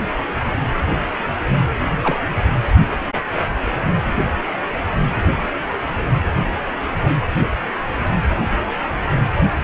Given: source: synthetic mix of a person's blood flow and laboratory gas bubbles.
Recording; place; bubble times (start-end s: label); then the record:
Doppler ultrasound of blood flow; precordium
2.02-2.20 s: bubbles
From the record:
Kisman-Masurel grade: 112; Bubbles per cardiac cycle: 1 to 2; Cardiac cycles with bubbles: 1 to 10%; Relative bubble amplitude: moderate (0.250 to 0.450); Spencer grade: 1 (occasional bubble signal discernible with the cardiac motion signal, with majority of cardiac periods free of bubbles); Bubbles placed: anywhere in the cardiac cycle